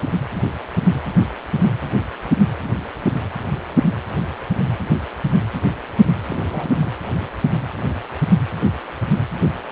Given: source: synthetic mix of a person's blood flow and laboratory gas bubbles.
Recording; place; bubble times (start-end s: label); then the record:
Doppler ultrasound of blood flow; precordium
6.25-6.43 s: bubbles
6.49-6.75 s: bubbles
6.81-6.94 s: bubbles
From the record:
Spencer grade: 1 (occasional bubble signal discernible with the cardiac motion signal, with majority of cardiac periods free of bubbles); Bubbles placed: anywhere in the cardiac cycle